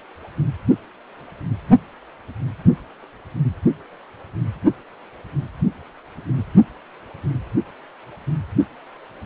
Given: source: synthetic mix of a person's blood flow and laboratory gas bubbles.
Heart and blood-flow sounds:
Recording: Doppler ultrasound of blood flow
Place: precordium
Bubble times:
no bubbles
From the record:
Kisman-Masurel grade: 000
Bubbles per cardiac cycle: 0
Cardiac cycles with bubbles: 0%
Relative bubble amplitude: no bubbles discernible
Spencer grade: 0 (complete lack of bubble signals)

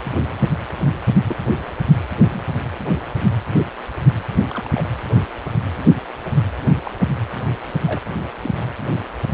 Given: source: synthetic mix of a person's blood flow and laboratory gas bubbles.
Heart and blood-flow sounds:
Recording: Doppler ultrasound of blood flow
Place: precordium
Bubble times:
1.28-1.36 s: bubbles
2.29-2.40 s: bubbles
4.49-4.84 s: bubbles
6.84-6.91 s: bubbles
7.84-8.02 s: bubbles
8.41-8.50 s: bubbles
From the record:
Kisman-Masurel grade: 121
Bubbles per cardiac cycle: 1 to 2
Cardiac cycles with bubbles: 10 to 50%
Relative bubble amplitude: barely perceptible (0.100 to 0.250)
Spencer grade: 2 (many but less than half of the cardiac periods contain bubble signals, singularly or in groups)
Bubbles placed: anywhere in the cardiac cycle

